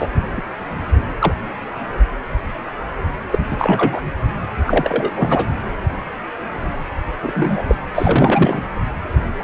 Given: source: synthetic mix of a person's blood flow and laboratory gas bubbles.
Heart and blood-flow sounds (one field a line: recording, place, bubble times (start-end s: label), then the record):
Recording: Doppler ultrasound of blood flow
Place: precordium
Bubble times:
0.00-0.10 s: bubbles
0.37-0.42 s: bubbles
1.20-1.34 s: bubbles
3.31-3.38 s: bubbles
3.50-4.03 s: bubbles
4.43-4.46 s: bubbles
4.67-5.11 s: bubbles
5.16-5.48 s: bubbles
7.23-7.62 s: bubbles
7.67-7.75 s: bubbles
7.95-8.62 s: bubbles
From the record:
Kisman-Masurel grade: 233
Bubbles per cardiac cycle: several, 3 to 8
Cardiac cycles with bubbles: 50 to 99%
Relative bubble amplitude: loud (0.450 to 0.775)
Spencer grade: 3 (all of the cardiac periods contain showers or single bubble signals, but not dominating or overriding the cardiac motion signals)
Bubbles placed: anywhere in the cardiac cycle